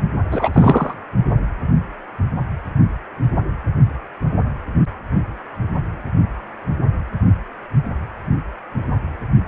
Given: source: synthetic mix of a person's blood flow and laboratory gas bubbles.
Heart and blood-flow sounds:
Doppler ultrasound of blood flow; precordium
0.30-0.93 s: bubbles
From the record:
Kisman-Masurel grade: 223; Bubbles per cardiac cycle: several, 3 to 8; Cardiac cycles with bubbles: 10 to 50%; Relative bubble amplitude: loud (0.450 to 0.775); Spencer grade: 2 (many but less than half of the cardiac periods contain bubble signals, singularly or in groups); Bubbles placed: only in the low amplitude regions of the cardiac cycle

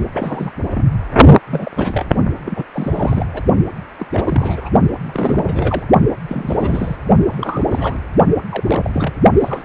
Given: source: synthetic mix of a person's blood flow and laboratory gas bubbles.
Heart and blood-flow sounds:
Doppler ultrasound of blood flow; precordium
0.14-0.50 s: bubbles
0.69-0.96 s: bubbles
1.47-1.72 s: bubbles
1.76-2.06 s: bubbles
2.45-2.63 s: bubbles
2.73-3.26 s: bubbles
3.33-3.43 s: bubbles
3.98-4.06 s: bubbles
4.12-4.69 s: bubbles
5.01-5.85 s: bubbles
6.29-6.96 s: bubbles
7.29-8.01 s: bubbles
8.49-8.90 s: bubbles
8.93-9.14 s: bubbles
9.41-9.65 s: bubbles
From the record:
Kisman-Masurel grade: 342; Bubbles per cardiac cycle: rolling drumbeat, 9 or more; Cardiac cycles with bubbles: 100%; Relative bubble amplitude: moderate (0.250 to 0.450); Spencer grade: 3 (all of the cardiac periods contain showers or single bubble signals, but not dominating or overriding the cardiac motion signals); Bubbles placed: only in the low amplitude regions of the cardiac cycle

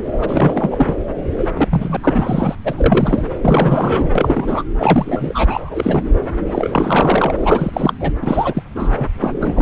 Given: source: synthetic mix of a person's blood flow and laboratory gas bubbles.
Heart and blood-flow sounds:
Doppler ultrasound of blood flow; subclavian vein
0.21-0.95 s: bubbles
1.38-1.47 s: bubbles
1.54-1.97 s: bubbles
2.03-2.55 s: bubbles
2.64-3.27 s: bubbles
3.41-4.11 s: bubbles
4.15-4.64 s: bubbles
4.78-5.45 s: bubbles
5.48-6.03 s: bubbles
6.47-7.35 s: bubbles
7.39-7.93 s: bubbles
8.00-8.12 s: bubbles
8.21-8.62 s: bubbles
8.75-9.07 s: bubbles
9.20-9.33 s: bubbles
9.39-9.62 s: bubbles
From the record:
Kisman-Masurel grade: 343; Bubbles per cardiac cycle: rolling drumbeat, 9 or more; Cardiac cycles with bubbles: 100%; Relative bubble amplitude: loud (0.450 to 0.775); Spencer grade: 3 (all of the cardiac periods contain showers or single bubble signals, but not dominating or overriding the cardiac motion signals); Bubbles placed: anywhere in the cardiac cycle

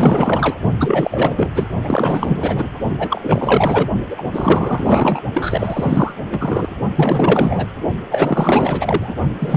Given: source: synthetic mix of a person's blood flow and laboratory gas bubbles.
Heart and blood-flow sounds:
Doppler ultrasound of blood flow; precordium
0.00-0.57 s: bubbles
0.80-1.49 s: bubbles
1.54-1.67 s: bubbles
1.83-2.68 s: bubbles
2.99-3.89 s: bubbles
4.10-4.23 s: bubbles
4.33-5.21 s: bubbles
5.35-6.12 s: bubbles
6.29-6.70 s: bubbles
6.96-7.66 s: bubbles
8.10-9.14 s: bubbles
9.39-9.57 s: bubbles
From the record:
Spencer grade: 4 (maximum detectable bubble signal sounding continuously throughout systole and diastole of every cardiac period, and overriding the amplitude of the normal cardiac signals); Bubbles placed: only in the low amplitude regions of the cardiac cycle

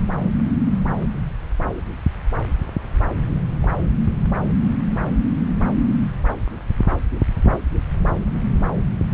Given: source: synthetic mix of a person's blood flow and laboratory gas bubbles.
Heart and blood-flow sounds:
Doppler ultrasound of blood flow; subclavian vein
3.62-3.67 s: bubbles
From the record:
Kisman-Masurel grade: 112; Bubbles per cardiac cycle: 1 to 2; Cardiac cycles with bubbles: 1 to 10%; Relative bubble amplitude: moderate (0.250 to 0.450); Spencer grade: 1 (occasional bubble signal discernible with the cardiac motion signal, with majority of cardiac periods free of bubbles); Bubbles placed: anywhere in the cardiac cycle

